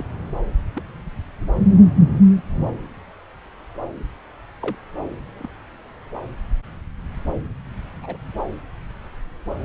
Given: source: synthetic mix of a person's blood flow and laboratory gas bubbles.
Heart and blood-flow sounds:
Doppler ultrasound of blood flow; subclavian vein
0.00-0.03 s: bubbles
0.75-0.83 s: bubbles
4.61-4.76 s: bubbles
5.38-5.48 s: bubbles
8.03-8.17 s: bubbles
From the record:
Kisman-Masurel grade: 121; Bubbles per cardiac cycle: 1 to 2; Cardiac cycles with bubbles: 10 to 50%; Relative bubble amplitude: barely perceptible (0.100 to 0.250); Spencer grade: 2 (many but less than half of the cardiac periods contain bubble signals, singularly or in groups); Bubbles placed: anywhere in the cardiac cycle

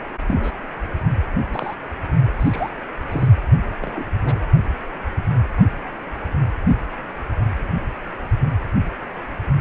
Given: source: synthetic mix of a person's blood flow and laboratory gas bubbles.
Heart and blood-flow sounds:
Doppler ultrasound of blood flow; precordium
0.27-0.55 s: bubbles
1.50-1.74 s: bubbles
2.39-2.70 s: bubbles
3.10-3.29 s: bubbles
3.81-4.04 s: bubbles
4.22-4.39 s: bubbles
From the record:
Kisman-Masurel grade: 121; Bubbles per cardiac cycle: 1 to 2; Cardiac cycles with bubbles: 10 to 50%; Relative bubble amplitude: barely perceptible (0.100 to 0.250); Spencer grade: 2 (many but less than half of the cardiac periods contain bubble signals, singularly or in groups); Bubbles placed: anywhere in the cardiac cycle

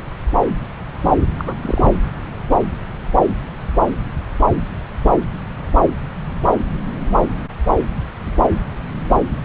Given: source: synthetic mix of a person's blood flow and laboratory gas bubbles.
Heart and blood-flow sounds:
Doppler ultrasound of blood flow; subclavian vein
1.39-1.54 s: bubbles
1.62-1.92 s: bubbles
From the record:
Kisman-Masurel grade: 222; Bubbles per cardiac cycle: several, 3 to 8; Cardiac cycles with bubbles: 10 to 50%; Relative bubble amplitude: moderate (0.250 to 0.450); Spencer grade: 2 (many but less than half of the cardiac periods contain bubble signals, singularly or in groups); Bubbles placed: anywhere in the cardiac cycle

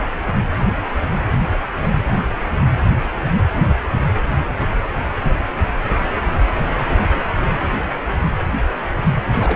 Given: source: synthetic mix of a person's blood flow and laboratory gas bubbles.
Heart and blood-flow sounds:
Doppler ultrasound of blood flow; precordium
9.37-9.56 s: bubbles
From the record:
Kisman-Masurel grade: 111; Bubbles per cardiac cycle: 1 to 2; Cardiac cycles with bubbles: 1 to 10%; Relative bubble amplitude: barely perceptible (0.100 to 0.250); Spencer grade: 1 (occasional bubble signal discernible with the cardiac motion signal, with majority of cardiac periods free of bubbles); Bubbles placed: anywhere in the cardiac cycle

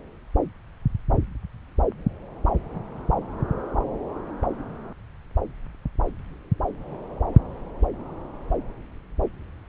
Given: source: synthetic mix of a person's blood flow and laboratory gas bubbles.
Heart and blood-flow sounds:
Doppler ultrasound of blood flow; subclavian vein
no bubbles
From the record:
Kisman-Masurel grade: 000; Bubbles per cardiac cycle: 0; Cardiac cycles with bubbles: 0%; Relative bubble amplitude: no bubbles discernible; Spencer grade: 0 (complete lack of bubble signals)

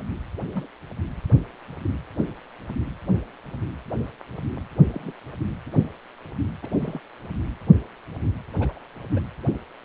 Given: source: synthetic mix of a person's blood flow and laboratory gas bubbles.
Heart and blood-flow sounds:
Doppler ultrasound of blood flow; precordium
0.51-0.66 s: bubbles
4.92-5.12 s: bubbles
6.62-6.68 s: bubbles
6.79-7.00 s: bubbles
8.60-8.79 s: bubbles
9.12-9.21 s: bubbles
From the record:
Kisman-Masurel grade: 121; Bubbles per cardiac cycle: 1 to 2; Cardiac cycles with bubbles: 10 to 50%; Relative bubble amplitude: barely perceptible (0.100 to 0.250); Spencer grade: 2 (many but less than half of the cardiac periods contain bubble signals, singularly or in groups); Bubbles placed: anywhere in the cardiac cycle

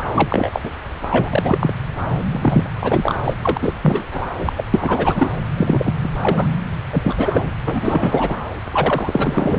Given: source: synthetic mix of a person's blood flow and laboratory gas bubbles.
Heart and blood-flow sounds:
Doppler ultrasound of blood flow; subclavian vein
0.14-0.61 s: bubbles
0.63-0.70 s: bubbles
1.10-1.73 s: bubbles
2.31-2.70 s: bubbles
2.79-3.15 s: bubbles
3.24-3.33 s: bubbles
3.42-3.58 s: bubbles
3.61-3.75 s: bubbles
3.81-4.05 s: bubbles
4.11-4.28 s: bubbles
4.38-4.52 s: bubbles
4.57-4.64 s: bubbles
4.73-5.33 s: bubbles
5.56-5.93 s: bubbles
6.03-6.08 s: bubbles
6.21-6.47 s: bubbles
6.92-7.53 s: bubbles
7.64-8.37 s: bubbles
8.72-9.59 s: bubbles
From the record:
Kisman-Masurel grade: 343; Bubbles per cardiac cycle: rolling drumbeat, 9 or more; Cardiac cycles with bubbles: 100%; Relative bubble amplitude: loud (0.450 to 0.775); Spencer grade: 3 (all of the cardiac periods contain showers or single bubble signals, but not dominating or overriding the cardiac motion signals); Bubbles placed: anywhere in the cardiac cycle

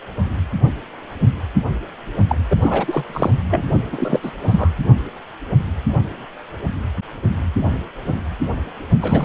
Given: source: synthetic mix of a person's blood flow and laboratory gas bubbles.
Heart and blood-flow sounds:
Doppler ultrasound of blood flow; precordium
2.29-2.35 s: bubbles
2.50-2.56 s: bubbles
2.62-3.31 s: bubbles
3.50-3.64 s: bubbles
3.92-4.19 s: bubbles
4.22-4.31 s: bubbles
4.43-4.71 s: bubbles
9.02-9.24 s: bubbles
From the record:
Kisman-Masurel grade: 332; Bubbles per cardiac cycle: rolling drumbeat, 9 or more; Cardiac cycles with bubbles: 50 to 99%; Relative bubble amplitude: moderate (0.250 to 0.450); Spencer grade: 3 (all of the cardiac periods contain showers or single bubble signals, but not dominating or overriding the cardiac motion signals); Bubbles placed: only in the low amplitude regions of the cardiac cycle

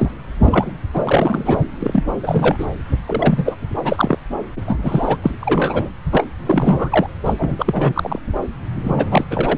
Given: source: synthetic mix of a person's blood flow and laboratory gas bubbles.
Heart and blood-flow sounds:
Doppler ultrasound of blood flow; subclavian vein
0.00-0.11 s: bubbles
0.42-0.72 s: bubbles
0.93-1.59 s: bubbles
1.79-2.04 s: bubbles
2.23-2.66 s: bubbles
3.07-3.56 s: bubbles
3.83-4.19 s: bubbles
4.66-5.18 s: bubbles
5.23-5.31 s: bubbles
5.40-5.89 s: bubbles
6.12-6.26 s: bubbles
6.46-7.07 s: bubbles
7.23-7.33 s: bubbles
7.38-8.19 s: bubbles
8.83-9.24 s: bubbles
9.30-9.58 s: bubbles
From the record:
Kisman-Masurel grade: 343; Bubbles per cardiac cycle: rolling drumbeat, 9 or more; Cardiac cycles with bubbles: 100%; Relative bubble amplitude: loud (0.450 to 0.775); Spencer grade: 3 (all of the cardiac periods contain showers or single bubble signals, but not dominating or overriding the cardiac motion signals); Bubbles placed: anywhere in the cardiac cycle

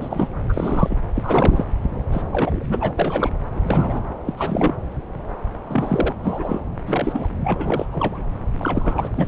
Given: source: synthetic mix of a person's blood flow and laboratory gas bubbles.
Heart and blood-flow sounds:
Doppler ultrasound of blood flow; subclavian vein
0.00-0.28 s: bubbles
0.48-0.98 s: bubbles
1.14-1.65 s: bubbles
2.12-2.24 s: bubbles
2.33-2.92 s: bubbles
2.98-3.30 s: bubbles
3.55-3.60 s: bubbles
3.63-4.04 s: bubbles
4.25-4.34 s: bubbles
4.37-4.75 s: bubbles
5.69-6.14 s: bubbles
6.23-6.59 s: bubbles
6.86-7.27 s: bubbles
7.43-7.86 s: bubbles
7.92-8.20 s: bubbles
8.59-9.27 s: bubbles
From the record:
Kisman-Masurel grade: 342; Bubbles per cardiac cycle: rolling drumbeat, 9 or more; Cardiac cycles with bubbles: 100%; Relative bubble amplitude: moderate (0.250 to 0.450); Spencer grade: 3 (all of the cardiac periods contain showers or single bubble signals, but not dominating or overriding the cardiac motion signals); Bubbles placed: anywhere in the cardiac cycle

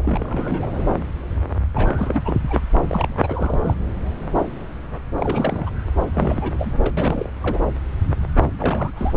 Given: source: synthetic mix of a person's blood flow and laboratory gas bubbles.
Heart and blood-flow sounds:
Doppler ultrasound of blood flow; subclavian vein
0.03-0.83 s: bubbles
1.74-2.23 s: bubbles
2.25-2.40 s: bubbles
2.48-2.60 s: bubbles
2.88-3.75 s: bubbles
5.19-5.70 s: bubbles
6.14-6.73 s: bubbles
6.78-6.95 s: bubbles
6.97-7.29 s: bubbles
7.42-7.60 s: bubbles
8.58-8.93 s: bubbles
8.96-9.15 s: bubbles
From the record:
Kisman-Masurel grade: 332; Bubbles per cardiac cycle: rolling drumbeat, 9 or more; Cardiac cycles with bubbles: 50 to 99%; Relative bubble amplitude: moderate (0.250 to 0.450); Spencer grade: 3 (all of the cardiac periods contain showers or single bubble signals, but not dominating or overriding the cardiac motion signals); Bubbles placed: anywhere in the cardiac cycle

